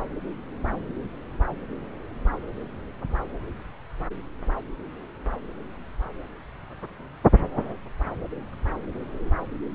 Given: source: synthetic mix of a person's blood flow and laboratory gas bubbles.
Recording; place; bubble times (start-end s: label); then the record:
Doppler ultrasound of blood flow; subclavian vein
no bubbles
From the record:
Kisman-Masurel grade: 000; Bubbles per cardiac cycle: 0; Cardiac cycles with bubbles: 0%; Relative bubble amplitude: no bubbles discernible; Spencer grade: 0 (complete lack of bubble signals)